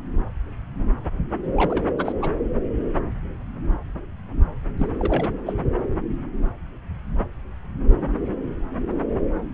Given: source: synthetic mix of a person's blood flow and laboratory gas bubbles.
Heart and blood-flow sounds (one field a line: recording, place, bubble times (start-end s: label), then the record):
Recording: Doppler ultrasound of blood flow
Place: subclavian vein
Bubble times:
1.56-1.83 s: bubbles
1.98-2.12 s: bubbles
2.21-2.29 s: bubbles
4.78-4.87 s: bubbles
4.99-5.32 s: bubbles
5.46-5.54 s: bubbles
From the record:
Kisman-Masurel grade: 221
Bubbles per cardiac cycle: several, 3 to 8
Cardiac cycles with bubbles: 10 to 50%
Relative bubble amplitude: barely perceptible (0.100 to 0.250)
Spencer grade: 2 (many but less than half of the cardiac periods contain bubble signals, singularly or in groups)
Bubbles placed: anywhere in the cardiac cycle